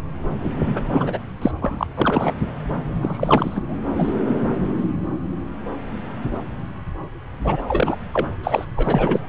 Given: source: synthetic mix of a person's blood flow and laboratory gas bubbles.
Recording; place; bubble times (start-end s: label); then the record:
Doppler ultrasound of blood flow; subclavian vein
0.44-0.54 s: bubbles
0.62-0.84 s: bubbles
0.89-1.18 s: bubbles
1.42-1.52 s: bubbles
1.59-1.87 s: bubbles
1.96-2.33 s: bubbles
3.02-3.62 s: bubbles
3.68-3.77 s: bubbles
3.97-4.14 s: bubbles
7.44-7.62 s: bubbles
7.68-7.97 s: bubbles
8.13-8.27 s: bubbles
8.43-8.65 s: bubbles
8.76-9.19 s: bubbles
From the record:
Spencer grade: 3 (all of the cardiac periods contain showers or single bubble signals, but not dominating or overriding the cardiac motion signals); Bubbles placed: anywhere in the cardiac cycle